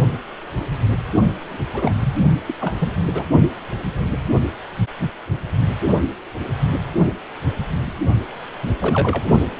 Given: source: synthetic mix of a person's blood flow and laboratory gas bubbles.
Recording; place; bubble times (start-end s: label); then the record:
Doppler ultrasound of blood flow; precordium
1.49-1.66 s: bubbles
1.73-1.93 s: bubbles
2.00-2.15 s: bubbles
2.48-2.54 s: bubbles
2.60-2.75 s: bubbles
2.78-2.88 s: bubbles
3.14-3.23 s: bubbles
8.62-8.68 s: bubbles
8.80-9.22 s: bubbles
From the record:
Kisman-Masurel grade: 222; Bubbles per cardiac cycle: several, 3 to 8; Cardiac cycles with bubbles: 10 to 50%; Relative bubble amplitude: moderate (0.250 to 0.450); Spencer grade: 2 (many but less than half of the cardiac periods contain bubble signals, singularly or in groups); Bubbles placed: only in the low amplitude regions of the cardiac cycle